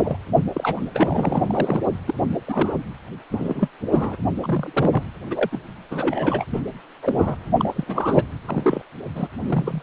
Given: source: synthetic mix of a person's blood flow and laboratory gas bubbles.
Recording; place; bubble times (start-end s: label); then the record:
Doppler ultrasound of blood flow; precordium
0.00-0.17 s: bubbles
0.54-0.80 s: bubbles
0.94-1.81 s: bubbles
2.07-2.14 s: bubbles
2.45-2.78 s: bubbles
3.31-3.68 s: bubbles
3.92-4.16 s: bubbles
4.42-5.04 s: bubbles
5.30-5.62 s: bubbles
5.91-6.45 s: bubbles
6.53-6.62 s: bubbles
7.03-7.36 s: bubbles
7.58-7.84 s: bubbles
7.87-8.23 s: bubbles
8.46-8.82 s: bubbles
9.15-9.28 s: bubbles
9.45-9.83 s: bubbles
From the record:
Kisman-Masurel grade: 242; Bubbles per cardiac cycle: several, 3 to 8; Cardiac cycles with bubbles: 100%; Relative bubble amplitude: moderate (0.250 to 0.450); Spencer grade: 3 (all of the cardiac periods contain showers or single bubble signals, but not dominating or overriding the cardiac motion signals); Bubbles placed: anywhere in the cardiac cycle